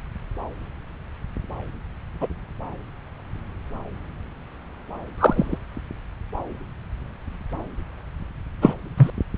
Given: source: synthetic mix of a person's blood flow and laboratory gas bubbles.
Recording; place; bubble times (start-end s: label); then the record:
Doppler ultrasound of blood flow; subclavian vein
2.21-2.27 s: bubbles
5.18-5.58 s: bubbles
8.62-8.73 s: bubbles
8.97-9.10 s: bubbles
From the record:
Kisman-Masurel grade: 123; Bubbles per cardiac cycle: 1 to 2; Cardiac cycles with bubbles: 10 to 50%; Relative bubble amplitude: loud (0.450 to 0.775); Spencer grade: 2 (many but less than half of the cardiac periods contain bubble signals, singularly or in groups); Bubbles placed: anywhere in the cardiac cycle